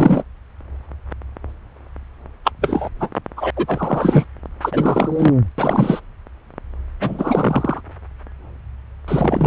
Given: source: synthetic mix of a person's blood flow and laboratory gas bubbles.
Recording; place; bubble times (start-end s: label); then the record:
Doppler ultrasound of blood flow; subclavian vein
0.00-0.23 s: bubbles
2.44-2.51 s: bubbles
2.61-2.89 s: bubbles
3.00-3.09 s: bubbles
3.37-3.50 s: bubbles
3.56-4.25 s: bubbles
4.61-5.34 s: bubbles
5.58-6.00 s: bubbles
7.00-7.80 s: bubbles
9.07-9.47 s: bubbles
From the record:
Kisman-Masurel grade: 333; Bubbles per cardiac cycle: rolling drumbeat, 9 or more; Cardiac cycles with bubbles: 50 to 99%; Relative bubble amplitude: loud (0.450 to 0.775); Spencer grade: 3 (all of the cardiac periods contain showers or single bubble signals, but not dominating or overriding the cardiac motion signals); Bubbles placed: anywhere in the cardiac cycle